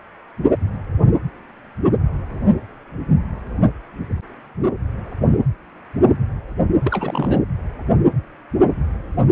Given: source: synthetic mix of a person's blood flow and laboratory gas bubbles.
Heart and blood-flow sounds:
Doppler ultrasound of blood flow; precordium
6.84-7.38 s: bubbles
From the record:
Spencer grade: 1 (occasional bubble signal discernible with the cardiac motion signal, with majority of cardiac periods free of bubbles); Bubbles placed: anywhere in the cardiac cycle

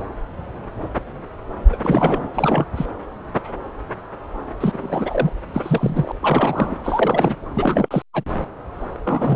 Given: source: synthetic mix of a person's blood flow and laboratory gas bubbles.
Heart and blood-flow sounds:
Doppler ultrasound of blood flow; subclavian vein
0.00-0.02 s: bubbles
1.68-1.79 s: bubbles
1.83-2.27 s: bubbles
2.34-2.66 s: bubbles
2.76-2.85 s: bubbles
4.60-5.30 s: bubbles
5.53-6.12 s: bubbles
6.21-6.76 s: bubbles
6.83-7.35 s: bubbles
7.54-8.02 s: bubbles
8.14-8.24 s: bubbles
9.04-9.35 s: bubbles
From the record:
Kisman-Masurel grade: 332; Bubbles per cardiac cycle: rolling drumbeat, 9 or more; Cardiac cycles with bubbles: 50 to 99%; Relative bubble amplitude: moderate (0.250 to 0.450); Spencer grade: 3 (all of the cardiac periods contain showers or single bubble signals, but not dominating or overriding the cardiac motion signals); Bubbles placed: anywhere in the cardiac cycle

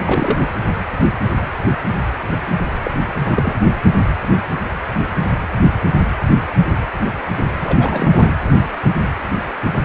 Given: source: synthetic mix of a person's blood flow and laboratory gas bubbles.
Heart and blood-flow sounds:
Doppler ultrasound of blood flow; precordium
0.05-0.40 s: bubbles
2.83-2.91 s: bubbles
3.21-3.54 s: bubbles
7.60-8.35 s: bubbles
From the record:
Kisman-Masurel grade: 222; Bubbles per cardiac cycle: several, 3 to 8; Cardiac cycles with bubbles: 10 to 50%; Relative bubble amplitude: moderate (0.250 to 0.450); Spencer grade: 2 (many but less than half of the cardiac periods contain bubble signals, singularly or in groups); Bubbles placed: anywhere in the cardiac cycle

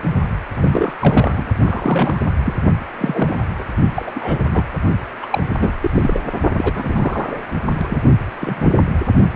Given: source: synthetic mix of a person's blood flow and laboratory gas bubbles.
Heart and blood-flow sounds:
Doppler ultrasound of blood flow; precordium
0.54-0.95 s: bubbles
1.00-1.49 s: bubbles
1.65-2.29 s: bubbles
2.44-2.54 s: bubbles
2.97-3.50 s: bubbles
3.58-3.64 s: bubbles
3.95-4.11 s: bubbles
4.15-4.45 s: bubbles
4.50-4.65 s: bubbles
5.22-5.26 s: bubbles
5.31-5.43 s: bubbles
5.60-5.71 s: bubbles
5.81-5.91 s: bubbles
5.94-6.21 s: bubbles
6.58-7.40 s: bubbles
7.73-8.03 s: bubbles
8.40-8.72 s: bubbles
8.75-8.85 s: bubbles
From the record:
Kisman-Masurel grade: 242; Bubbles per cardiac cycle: several, 3 to 8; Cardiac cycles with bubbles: 100%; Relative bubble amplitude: moderate (0.250 to 0.450); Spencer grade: 3 (all of the cardiac periods contain showers or single bubble signals, but not dominating or overriding the cardiac motion signals); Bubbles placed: only in the low amplitude regions of the cardiac cycle

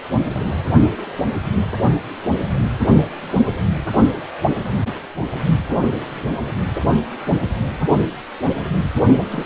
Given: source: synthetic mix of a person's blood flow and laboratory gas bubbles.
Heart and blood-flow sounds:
Doppler ultrasound of blood flow; precordium
9.30-9.46 s: bubbles
From the record:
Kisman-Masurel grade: 223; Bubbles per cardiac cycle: several, 3 to 8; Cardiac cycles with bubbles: 10 to 50%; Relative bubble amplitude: loud (0.450 to 0.775); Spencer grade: 2 (many but less than half of the cardiac periods contain bubble signals, singularly or in groups); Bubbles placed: only in the low amplitude regions of the cardiac cycle

